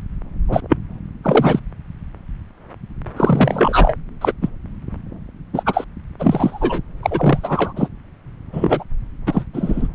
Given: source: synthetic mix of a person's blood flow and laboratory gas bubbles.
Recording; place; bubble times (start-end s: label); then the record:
Doppler ultrasound of blood flow; subclavian vein
0.48-0.60 s: bubbles
0.69-0.77 s: bubbles
1.24-1.59 s: bubbles
3.17-3.97 s: bubbles
4.21-4.33 s: bubbles
4.42-4.49 s: bubbles
5.53-5.63 s: bubbles
5.66-5.85 s: bubbles
6.19-6.81 s: bubbles
7.03-7.73 s: bubbles
7.76-7.88 s: bubbles
8.53-8.84 s: bubbles
9.26-9.45 s: bubbles
9.53-9.88 s: bubbles
From the record:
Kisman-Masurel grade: 233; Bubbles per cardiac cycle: several, 3 to 8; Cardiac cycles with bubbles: 50 to 99%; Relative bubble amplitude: loud (0.450 to 0.775); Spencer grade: 3 (all of the cardiac periods contain showers or single bubble signals, but not dominating or overriding the cardiac motion signals); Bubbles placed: anywhere in the cardiac cycle